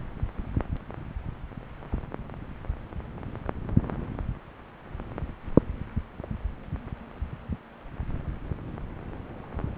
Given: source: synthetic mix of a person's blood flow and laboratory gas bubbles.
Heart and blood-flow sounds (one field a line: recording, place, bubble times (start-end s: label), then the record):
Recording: Doppler ultrasound of blood flow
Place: subclavian vein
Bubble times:
1.89-1.99 s: bubbles
From the record:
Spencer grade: 1 (occasional bubble signal discernible with the cardiac motion signal, with majority of cardiac periods free of bubbles)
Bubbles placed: anywhere in the cardiac cycle